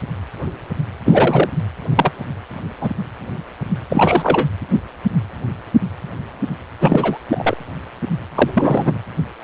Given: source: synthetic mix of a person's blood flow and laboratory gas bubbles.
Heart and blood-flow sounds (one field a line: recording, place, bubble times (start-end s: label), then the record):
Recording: Doppler ultrasound of blood flow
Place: precordium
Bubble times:
1.05-1.50 s: bubbles
1.96-2.11 s: bubbles
2.80-2.90 s: bubbles
3.90-4.47 s: bubbles
6.80-7.18 s: bubbles
7.29-7.56 s: bubbles
8.35-8.98 s: bubbles
From the record:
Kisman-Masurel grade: 223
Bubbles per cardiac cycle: several, 3 to 8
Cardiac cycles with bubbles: 10 to 50%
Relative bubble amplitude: loud (0.450 to 0.775)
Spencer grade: 2 (many but less than half of the cardiac periods contain bubble signals, singularly or in groups)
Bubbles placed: anywhere in the cardiac cycle